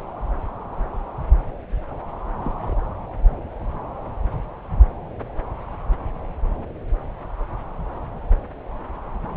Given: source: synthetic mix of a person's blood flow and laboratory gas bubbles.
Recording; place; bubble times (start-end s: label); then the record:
Doppler ultrasound of blood flow; subclavian vein
2.44-2.55 s: bubbles
2.58-2.76 s: bubbles
From the record:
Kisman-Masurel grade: 111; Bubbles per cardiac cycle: 1 to 2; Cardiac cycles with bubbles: 1 to 10%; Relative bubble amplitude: barely perceptible (0.100 to 0.250); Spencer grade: 1 (occasional bubble signal discernible with the cardiac motion signal, with majority of cardiac periods free of bubbles); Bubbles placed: anywhere in the cardiac cycle